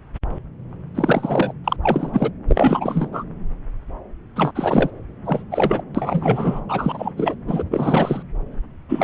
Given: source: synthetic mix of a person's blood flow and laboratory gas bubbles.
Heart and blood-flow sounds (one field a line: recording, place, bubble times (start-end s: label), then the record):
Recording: Doppler ultrasound of blood flow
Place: subclavian vein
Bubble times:
0.95-1.53 s: bubbles
1.64-1.76 s: bubbles
1.83-2.31 s: bubbles
2.49-3.09 s: bubbles
3.12-3.24 s: bubbles
4.36-4.52 s: bubbles
4.55-4.91 s: bubbles
5.25-5.44 s: bubbles
5.51-5.82 s: bubbles
5.95-6.64 s: bubbles
6.69-7.12 s: bubbles
7.17-7.35 s: bubbles
7.47-7.64 s: bubbles
7.70-8.22 s: bubbles
8.89-9.03 s: bubbles
From the record:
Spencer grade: 3 (all of the cardiac periods contain showers or single bubble signals, but not dominating or overriding the cardiac motion signals)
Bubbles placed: anywhere in the cardiac cycle